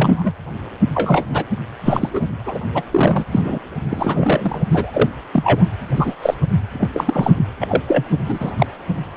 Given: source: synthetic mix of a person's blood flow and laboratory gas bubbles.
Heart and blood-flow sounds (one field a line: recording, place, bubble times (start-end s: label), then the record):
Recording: Doppler ultrasound of blood flow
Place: precordium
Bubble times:
0.00-0.33 s: bubbles
0.95-1.24 s: bubbles
1.30-1.45 s: bubbles
1.85-2.09 s: bubbles
2.14-2.29 s: bubbles
2.46-2.58 s: bubbles
2.75-2.83 s: bubbles
2.92-3.25 s: bubbles
3.31-3.42 s: bubbles
3.45-3.59 s: bubbles
3.90-4.62 s: bubbles
4.71-5.10 s: bubbles
5.33-5.66 s: bubbles
5.96-6.14 s: bubbles
6.21-6.34 s: bubbles
6.73-6.88 s: bubbles
6.92-7.33 s: bubbles
7.61-7.82 s: bubbles
7.88-8.04 s: bubbles
8.24-8.52 s: bubbles
8.58-8.66 s: bubbles
From the record:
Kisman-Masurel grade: 233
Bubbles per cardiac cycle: several, 3 to 8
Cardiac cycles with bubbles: 50 to 99%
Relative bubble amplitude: loud (0.450 to 0.775)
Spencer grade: 3 (all of the cardiac periods contain showers or single bubble signals, but not dominating or overriding the cardiac motion signals)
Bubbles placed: anywhere in the cardiac cycle